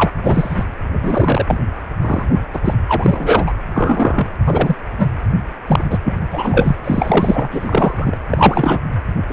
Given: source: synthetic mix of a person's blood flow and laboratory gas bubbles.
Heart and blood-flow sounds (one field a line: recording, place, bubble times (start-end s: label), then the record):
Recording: Doppler ultrasound of blood flow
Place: precordium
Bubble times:
0.00-0.12 s: bubbles
0.22-0.64 s: bubbles
0.92-1.58 s: bubbles
2.01-2.25 s: bubbles
2.53-2.59 s: bubbles
2.64-2.74 s: bubbles
2.88-3.52 s: bubbles
3.74-4.30 s: bubbles
4.46-4.76 s: bubbles
4.98-5.10 s: bubbles
5.67-5.85 s: bubbles
5.90-5.98 s: bubbles
6.04-6.18 s: bubbles
6.31-6.77 s: bubbles
6.84-7.49 s: bubbles
7.51-8.18 s: bubbles
8.30-8.80 s: bubbles
9.28-9.33 s: bubbles
From the record:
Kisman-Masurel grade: 243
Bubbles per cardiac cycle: several, 3 to 8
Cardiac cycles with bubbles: 100%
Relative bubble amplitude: loud (0.450 to 0.775)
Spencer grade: 3 (all of the cardiac periods contain showers or single bubble signals, but not dominating or overriding the cardiac motion signals)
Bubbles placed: anywhere in the cardiac cycle